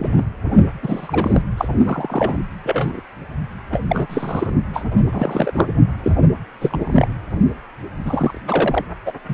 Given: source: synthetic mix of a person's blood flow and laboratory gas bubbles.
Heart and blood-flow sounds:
Doppler ultrasound of blood flow; precordium
0.00-0.25 s: bubbles
0.82-1.42 s: bubbles
1.57-1.68 s: bubbles
1.85-2.42 s: bubbles
2.63-3.00 s: bubbles
3.71-3.82 s: bubbles
3.88-4.07 s: bubbles
4.09-4.51 s: bubbles
4.73-4.83 s: bubbles
5.12-5.67 s: bubbles
6.04-6.17 s: bubbles
6.61-7.08 s: bubbles
8.03-8.41 s: bubbles
8.47-8.85 s: bubbles
9.05-9.12 s: bubbles
9.29-9.34 s: bubbles
From the record:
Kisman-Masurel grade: 242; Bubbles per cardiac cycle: several, 3 to 8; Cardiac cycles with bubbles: 100%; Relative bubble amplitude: moderate (0.250 to 0.450); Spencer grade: 3 (all of the cardiac periods contain showers or single bubble signals, but not dominating or overriding the cardiac motion signals); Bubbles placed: only in the low amplitude regions of the cardiac cycle

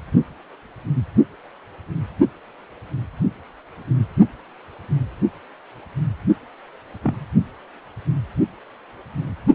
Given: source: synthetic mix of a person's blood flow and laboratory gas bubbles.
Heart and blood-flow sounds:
Doppler ultrasound of blood flow; precordium
7.04-7.25 s: bubbles
From the record:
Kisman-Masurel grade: 122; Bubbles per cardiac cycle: 1 to 2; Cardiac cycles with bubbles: 10 to 50%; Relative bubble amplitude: moderate (0.250 to 0.450); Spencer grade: 2 (many but less than half of the cardiac periods contain bubble signals, singularly or in groups); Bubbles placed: only in the low amplitude regions of the cardiac cycle

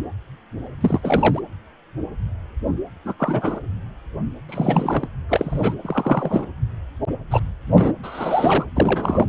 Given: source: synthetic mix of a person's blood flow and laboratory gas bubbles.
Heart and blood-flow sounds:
Doppler ultrasound of blood flow; precordium
0.80-1.40 s: bubbles
3.04-3.14 s: bubbles
3.19-3.61 s: bubbles
4.48-5.08 s: bubbles
5.28-5.75 s: bubbles
5.81-6.46 s: bubbles
7.30-7.41 s: bubbles
7.68-7.93 s: bubbles
8.03-8.64 s: bubbles
8.75-9.25 s: bubbles
From the record:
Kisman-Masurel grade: 233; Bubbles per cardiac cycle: several, 3 to 8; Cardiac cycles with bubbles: 50 to 99%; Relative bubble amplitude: loud (0.450 to 0.775); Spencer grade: 3 (all of the cardiac periods contain showers or single bubble signals, but not dominating or overriding the cardiac motion signals); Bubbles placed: anywhere in the cardiac cycle

